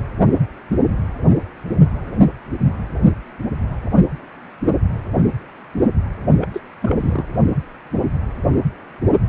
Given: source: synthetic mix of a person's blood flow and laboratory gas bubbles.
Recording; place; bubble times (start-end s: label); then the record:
Doppler ultrasound of blood flow; precordium
6.41-6.47 s: bubbles
6.54-6.61 s: bubbles
6.81-7.24 s: bubbles
From the record:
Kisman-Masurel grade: 212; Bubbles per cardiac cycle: several, 3 to 8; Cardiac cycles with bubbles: 1 to 10%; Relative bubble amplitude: moderate (0.250 to 0.450); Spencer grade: 1 (occasional bubble signal discernible with the cardiac motion signal, with majority of cardiac periods free of bubbles); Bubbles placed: only in the low amplitude regions of the cardiac cycle